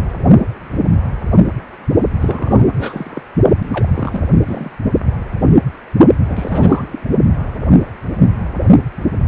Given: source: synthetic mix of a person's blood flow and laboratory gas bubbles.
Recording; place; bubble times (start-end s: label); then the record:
Doppler ultrasound of blood flow; precordium
2.20-2.66 s: bubbles
2.69-3.23 s: bubbles
3.62-3.91 s: bubbles
3.95-4.21 s: bubbles
4.45-4.72 s: bubbles
6.26-7.02 s: bubbles
From the record:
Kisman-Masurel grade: 332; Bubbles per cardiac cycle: rolling drumbeat, 9 or more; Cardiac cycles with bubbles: 50 to 99%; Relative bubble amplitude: moderate (0.250 to 0.450); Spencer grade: 3 (all of the cardiac periods contain showers or single bubble signals, but not dominating or overriding the cardiac motion signals); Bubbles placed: only in the low amplitude regions of the cardiac cycle